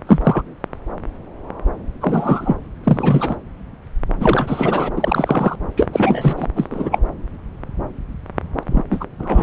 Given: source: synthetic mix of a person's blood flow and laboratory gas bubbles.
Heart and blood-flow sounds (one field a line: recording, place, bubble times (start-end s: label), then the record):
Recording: Doppler ultrasound of blood flow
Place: subclavian vein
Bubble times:
0.07-0.22 s: bubbles
0.24-0.42 s: bubbles
2.00-2.55 s: bubbles
2.83-3.36 s: bubbles
4.20-4.91 s: bubbles
4.96-5.56 s: bubbles
5.76-5.88 s: bubbles
5.92-6.45 s: bubbles
6.56-6.68 s: bubbles
6.71-6.99 s: bubbles
8.69-8.84 s: bubbles
8.90-9.04 s: bubbles
9.19-9.43 s: bubbles
From the record:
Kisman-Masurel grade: 233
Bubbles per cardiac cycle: several, 3 to 8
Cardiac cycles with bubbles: 50 to 99%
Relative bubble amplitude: loud (0.450 to 0.775)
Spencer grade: 3 (all of the cardiac periods contain showers or single bubble signals, but not dominating or overriding the cardiac motion signals)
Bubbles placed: anywhere in the cardiac cycle